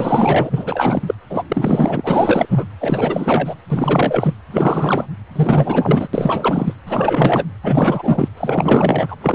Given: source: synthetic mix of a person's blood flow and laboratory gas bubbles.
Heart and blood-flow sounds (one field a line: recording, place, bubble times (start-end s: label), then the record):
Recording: Doppler ultrasound of blood flow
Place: precordium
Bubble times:
0.00-1.15 s: bubbles
1.30-1.43 s: bubbles
1.48-2.65 s: bubbles
2.80-3.56 s: bubbles
3.68-4.34 s: bubbles
4.50-5.06 s: bubbles
5.35-6.08 s: bubbles
6.13-6.73 s: bubbles
6.86-7.46 s: bubbles
7.62-8.29 s: bubbles
8.37-9.15 s: bubbles
9.21-9.35 s: bubbles
From the record:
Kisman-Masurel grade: 444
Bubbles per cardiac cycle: continuous sound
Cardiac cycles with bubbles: 100%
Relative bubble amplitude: maximal (0.775 to 0.999)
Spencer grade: 4 (maximum detectable bubble signal sounding continuously throughout systole and diastole of every cardiac period, and overriding the amplitude of the normal cardiac signals)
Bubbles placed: anywhere in the cardiac cycle